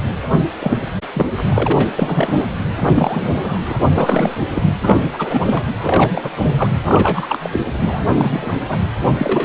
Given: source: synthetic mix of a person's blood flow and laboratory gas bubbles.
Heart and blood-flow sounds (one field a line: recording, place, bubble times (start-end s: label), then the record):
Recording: Doppler ultrasound of blood flow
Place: precordium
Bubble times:
0.59-0.78 s: bubbles
1.14-1.32 s: bubbles
1.36-1.42 s: bubbles
1.48-1.88 s: bubbles
1.98-2.46 s: bubbles
2.79-3.77 s: bubbles
3.93-4.36 s: bubbles
4.54-4.62 s: bubbles
4.83-4.99 s: bubbles
5.13-5.65 s: bubbles
5.79-6.31 s: bubbles
6.37-6.71 s: bubbles
6.83-7.50 s: bubbles
7.53-7.60 s: bubbles
7.79-8.03 s: bubbles
8.11-8.80 s: bubbles
9.18-9.45 s: bubbles
From the record:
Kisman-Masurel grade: 343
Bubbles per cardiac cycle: rolling drumbeat, 9 or more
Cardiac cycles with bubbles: 100%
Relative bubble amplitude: loud (0.450 to 0.775)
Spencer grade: 3 (all of the cardiac periods contain showers or single bubble signals, but not dominating or overriding the cardiac motion signals)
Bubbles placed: anywhere in the cardiac cycle